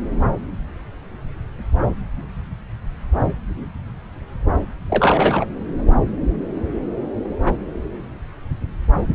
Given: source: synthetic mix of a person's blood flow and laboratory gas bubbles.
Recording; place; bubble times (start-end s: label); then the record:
Doppler ultrasound of blood flow; subclavian vein
4.90-5.46 s: bubbles
From the record:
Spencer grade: 1 (occasional bubble signal discernible with the cardiac motion signal, with majority of cardiac periods free of bubbles); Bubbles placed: anywhere in the cardiac cycle